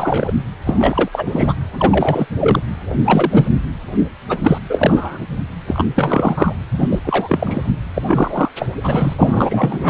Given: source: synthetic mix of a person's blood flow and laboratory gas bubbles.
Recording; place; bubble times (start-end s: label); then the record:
Doppler ultrasound of blood flow; precordium
0.00-0.32 s: bubbles
0.65-1.08 s: bubbles
1.12-1.53 s: bubbles
1.73-2.27 s: bubbles
2.40-2.59 s: bubbles
2.90-2.94 s: bubbles
3.04-3.48 s: bubbles
4.29-4.58 s: bubbles
4.70-5.19 s: bubbles
5.67-5.86 s: bubbles
5.95-6.53 s: bubbles
6.71-6.99 s: bubbles
7.04-7.71 s: bubbles
7.94-8.51 s: bubbles
8.59-8.68 s: bubbles
8.83-9.14 s: bubbles
9.18-9.90 s: bubbles
From the record:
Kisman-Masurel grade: 343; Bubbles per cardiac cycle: rolling drumbeat, 9 or more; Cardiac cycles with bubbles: 100%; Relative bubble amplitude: loud (0.450 to 0.775); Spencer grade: 3 (all of the cardiac periods contain showers or single bubble signals, but not dominating or overriding the cardiac motion signals); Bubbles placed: anywhere in the cardiac cycle